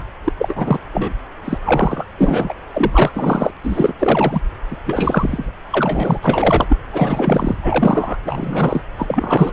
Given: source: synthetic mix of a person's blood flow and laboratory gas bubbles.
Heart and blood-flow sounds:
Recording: Doppler ultrasound of blood flow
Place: subclavian vein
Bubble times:
0.00-0.02 s: bubbles
0.24-0.33 s: bubbles
0.39-0.78 s: bubbles
0.93-1.12 s: bubbles
1.45-1.58 s: bubbles
1.62-2.06 s: bubbles
2.18-2.54 s: bubbles
2.70-3.11 s: bubbles
3.13-3.50 s: bubbles
3.63-3.93 s: bubbles
3.98-4.41 s: bubbles
4.71-4.77 s: bubbles
4.86-5.52 s: bubbles
5.71-6.19 s: bubbles
6.21-6.77 s: bubbles
6.93-7.57 s: bubbles
7.62-8.16 s: bubbles
8.24-8.81 s: bubbles
8.96-9.53 s: bubbles
From the record:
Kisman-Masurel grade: 343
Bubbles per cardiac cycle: rolling drumbeat, 9 or more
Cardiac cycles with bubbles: 100%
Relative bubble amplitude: loud (0.450 to 0.775)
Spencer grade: 3 (all of the cardiac periods contain showers or single bubble signals, but not dominating or overriding the cardiac motion signals)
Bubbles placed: anywhere in the cardiac cycle

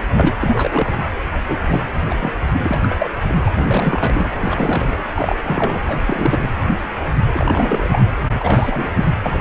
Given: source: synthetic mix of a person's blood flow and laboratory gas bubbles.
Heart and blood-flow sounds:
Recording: Doppler ultrasound of blood flow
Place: precordium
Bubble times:
0.00-0.04 s: bubbles
0.12-0.32 s: bubbles
0.40-1.03 s: bubbles
1.48-1.59 s: bubbles
1.67-1.86 s: bubbles
2.09-2.32 s: bubbles
2.53-3.09 s: bubbles
3.22-3.50 s: bubbles
3.55-4.29 s: bubbles
4.39-5.01 s: bubbles
5.15-5.35 s: bubbles
5.43-5.80 s: bubbles
5.88-6.00 s: bubbles
6.06-6.50 s: bubbles
7.34-7.88 s: bubbles
7.91-8.03 s: bubbles
8.31-9.09 s: bubbles
9.22-9.41 s: bubbles
From the record:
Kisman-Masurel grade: 332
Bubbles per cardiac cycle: rolling drumbeat, 9 or more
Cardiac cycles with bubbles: 50 to 99%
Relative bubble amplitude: moderate (0.250 to 0.450)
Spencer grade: 3 (all of the cardiac periods contain showers or single bubble signals, but not dominating or overriding the cardiac motion signals)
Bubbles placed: anywhere in the cardiac cycle

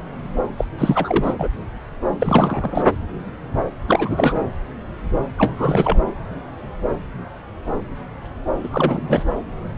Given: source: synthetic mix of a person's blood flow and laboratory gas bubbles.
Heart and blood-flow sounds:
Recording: Doppler ultrasound of blood flow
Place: subclavian vein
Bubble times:
0.58-0.65 s: bubbles
0.78-1.34 s: bubbles
1.39-1.49 s: bubbles
2.19-2.84 s: bubbles
3.88-4.41 s: bubbles
5.38-5.99 s: bubbles
8.63-9.23 s: bubbles
From the record:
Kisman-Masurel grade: 332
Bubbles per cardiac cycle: rolling drumbeat, 9 or more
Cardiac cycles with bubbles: 50 to 99%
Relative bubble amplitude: moderate (0.250 to 0.450)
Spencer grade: 3 (all of the cardiac periods contain showers or single bubble signals, but not dominating or overriding the cardiac motion signals)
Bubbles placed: anywhere in the cardiac cycle

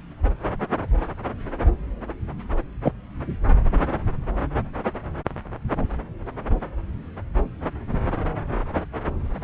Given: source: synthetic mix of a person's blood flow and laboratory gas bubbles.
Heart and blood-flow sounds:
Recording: Doppler ultrasound of blood flow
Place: subclavian vein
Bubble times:
2.84-2.92 s: bubbles
From the record:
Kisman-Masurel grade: 113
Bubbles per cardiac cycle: 1 to 2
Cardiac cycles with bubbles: 1 to 10%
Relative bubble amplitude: loud (0.450 to 0.775)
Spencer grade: 1 (occasional bubble signal discernible with the cardiac motion signal, with majority of cardiac periods free of bubbles)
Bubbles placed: anywhere in the cardiac cycle

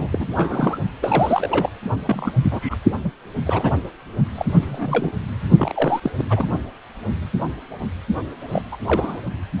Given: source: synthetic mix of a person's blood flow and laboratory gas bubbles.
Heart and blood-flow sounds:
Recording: Doppler ultrasound of blood flow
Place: precordium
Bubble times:
0.00-0.08 s: bubbles
0.11-0.28 s: bubbles
0.34-0.78 s: bubbles
1.02-1.70 s: bubbles
2.06-2.32 s: bubbles
2.43-2.77 s: bubbles
3.04-3.10 s: bubbles
3.46-3.71 s: bubbles
4.35-5.12 s: bubbles
5.59-6.11 s: bubbles
6.18-6.25 s: bubbles
6.29-6.46 s: bubbles
8.48-8.62 s: bubbles
8.71-8.77 s: bubbles
8.86-9.18 s: bubbles
From the record:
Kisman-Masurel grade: 232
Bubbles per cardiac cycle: several, 3 to 8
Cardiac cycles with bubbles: 50 to 99%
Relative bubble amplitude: moderate (0.250 to 0.450)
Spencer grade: 3 (all of the cardiac periods contain showers or single bubble signals, but not dominating or overriding the cardiac motion signals)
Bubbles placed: only in the low amplitude regions of the cardiac cycle

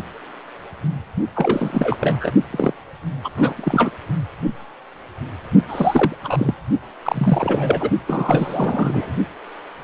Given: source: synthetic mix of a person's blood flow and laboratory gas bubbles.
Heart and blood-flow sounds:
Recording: Doppler ultrasound of blood flow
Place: precordium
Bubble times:
1.35-1.98 s: bubbles
2.00-2.32 s: bubbles
2.50-2.74 s: bubbles
3.24-3.29 s: bubbles
3.37-3.92 s: bubbles
5.69-6.16 s: bubbles
6.21-6.54 s: bubbles
7.03-7.90 s: bubbles
8.06-9.12 s: bubbles
From the record:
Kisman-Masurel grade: 333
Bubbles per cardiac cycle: rolling drumbeat, 9 or more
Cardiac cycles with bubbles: 50 to 99%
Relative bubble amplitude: loud (0.450 to 0.775)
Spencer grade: 3 (all of the cardiac periods contain showers or single bubble signals, but not dominating or overriding the cardiac motion signals)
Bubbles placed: only in the low amplitude regions of the cardiac cycle

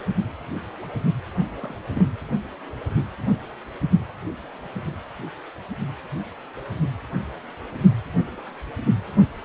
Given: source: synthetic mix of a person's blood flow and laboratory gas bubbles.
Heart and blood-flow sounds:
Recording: Doppler ultrasound of blood flow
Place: precordium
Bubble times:
1.61-1.81 s: bubbles
1.95-2.08 s: bubbles
From the record:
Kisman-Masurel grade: 111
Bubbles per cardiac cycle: 1 to 2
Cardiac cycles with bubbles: 1 to 10%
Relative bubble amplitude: barely perceptible (0.100 to 0.250)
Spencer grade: 1 (occasional bubble signal discernible with the cardiac motion signal, with majority of cardiac periods free of bubbles)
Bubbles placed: anywhere in the cardiac cycle

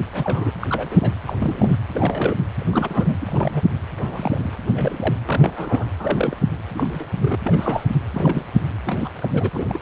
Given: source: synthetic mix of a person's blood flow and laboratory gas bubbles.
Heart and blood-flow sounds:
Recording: Doppler ultrasound of blood flow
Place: precordium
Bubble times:
0.13-0.53 s: bubbles
0.61-0.67 s: bubbles
0.70-1.21 s: bubbles
1.26-1.35 s: bubbles
1.38-1.76 s: bubbles
1.92-2.35 s: bubbles
2.56-3.62 s: bubbles
3.96-4.54 s: bubbles
4.71-5.15 s: bubbles
5.25-5.85 s: bubbles
5.98-6.37 s: bubbles
6.74-7.05 s: bubbles
7.19-7.38 s: bubbles
7.43-7.87 s: bubbles
8.13-8.45 s: bubbles
8.85-9.10 s: bubbles
9.21-9.49 s: bubbles
9.53-9.78 s: bubbles
From the record:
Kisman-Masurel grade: 232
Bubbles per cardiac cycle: several, 3 to 8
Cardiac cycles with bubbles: 50 to 99%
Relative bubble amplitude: moderate (0.250 to 0.450)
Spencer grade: 3 (all of the cardiac periods contain showers or single bubble signals, but not dominating or overriding the cardiac motion signals)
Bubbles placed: anywhere in the cardiac cycle

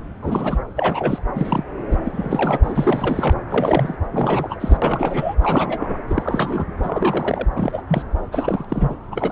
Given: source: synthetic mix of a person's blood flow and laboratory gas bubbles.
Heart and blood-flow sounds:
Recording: Doppler ultrasound of blood flow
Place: subclavian vein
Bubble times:
0.22-0.59 s: bubbles
0.75-1.22 s: bubbles
1.35-1.64 s: bubbles
1.90-1.97 s: bubbles
2.04-2.57 s: bubbles
2.61-3.35 s: bubbles
3.49-3.96 s: bubbles
4.11-4.79 s: bubbles
4.81-5.35 s: bubbles
5.42-5.97 s: bubbles
6.08-6.66 s: bubbles
6.83-7.47 s: bubbles
7.55-7.81 s: bubbles
7.88-8.03 s: bubbles
8.31-8.65 s: bubbles
8.69-8.96 s: bubbles
9.11-9.32 s: bubbles
From the record:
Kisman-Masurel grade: 342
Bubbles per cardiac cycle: rolling drumbeat, 9 or more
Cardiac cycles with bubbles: 100%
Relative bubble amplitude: moderate (0.250 to 0.450)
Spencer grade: 3 (all of the cardiac periods contain showers or single bubble signals, but not dominating or overriding the cardiac motion signals)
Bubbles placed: anywhere in the cardiac cycle

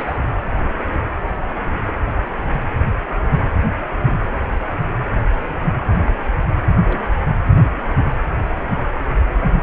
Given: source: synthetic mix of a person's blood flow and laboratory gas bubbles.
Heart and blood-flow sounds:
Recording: Doppler ultrasound of blood flow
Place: precordium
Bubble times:
0.00-0.17 s: bubbles
4.00-4.14 s: bubbles
6.04-6.11 s: bubbles
6.85-7.00 s: bubbles
7.29-7.33 s: bubbles
From the record:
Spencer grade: 2 (many but less than half of the cardiac periods contain bubble signals, singularly or in groups)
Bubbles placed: anywhere in the cardiac cycle

